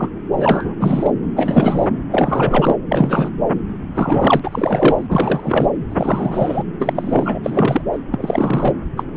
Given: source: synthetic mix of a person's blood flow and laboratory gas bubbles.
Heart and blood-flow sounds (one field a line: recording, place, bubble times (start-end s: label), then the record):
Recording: Doppler ultrasound of blood flow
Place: subclavian vein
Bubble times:
0.00-0.09 s: bubbles
0.32-0.65 s: bubbles
0.79-1.11 s: bubbles
1.36-1.89 s: bubbles
2.12-2.76 s: bubbles
2.91-3.29 s: bubbles
3.94-4.40 s: bubbles
4.43-5.70 s: bubbles
5.90-6.63 s: bubbles
6.79-7.39 s: bubbles
7.43-7.81 s: bubbles
7.93-7.98 s: bubbles
8.12-8.73 s: bubbles
8.97-9.04 s: bubbles
9.14-9.17 s: bubbles
From the record:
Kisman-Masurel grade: 342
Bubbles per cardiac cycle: rolling drumbeat, 9 or more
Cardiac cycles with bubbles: 100%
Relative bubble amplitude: moderate (0.250 to 0.450)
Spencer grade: 3 (all of the cardiac periods contain showers or single bubble signals, but not dominating or overriding the cardiac motion signals)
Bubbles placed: anywhere in the cardiac cycle